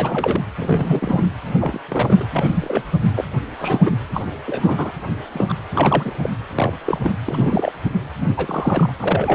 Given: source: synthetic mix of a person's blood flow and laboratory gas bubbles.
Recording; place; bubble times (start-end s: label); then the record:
Doppler ultrasound of blood flow; precordium
0.00-0.41 s: bubbles
0.57-1.25 s: bubbles
1.59-1.80 s: bubbles
1.88-2.25 s: bubbles
2.35-2.83 s: bubbles
3.15-3.25 s: bubbles
3.58-3.92 s: bubbles
4.14-4.25 s: bubbles
4.45-4.91 s: bubbles
5.33-5.54 s: bubbles
5.71-6.11 s: bubbles
6.21-6.29 s: bubbles
6.55-6.73 s: bubbles
6.85-6.99 s: bubbles
7.03-7.14 s: bubbles
7.26-7.72 s: bubbles
8.21-8.92 s: bubbles
8.99-9.35 s: bubbles
From the record:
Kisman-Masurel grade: 242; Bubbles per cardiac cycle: several, 3 to 8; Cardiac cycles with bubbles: 100%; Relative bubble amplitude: moderate (0.250 to 0.450); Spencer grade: 3 (all of the cardiac periods contain showers or single bubble signals, but not dominating or overriding the cardiac motion signals); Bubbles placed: anywhere in the cardiac cycle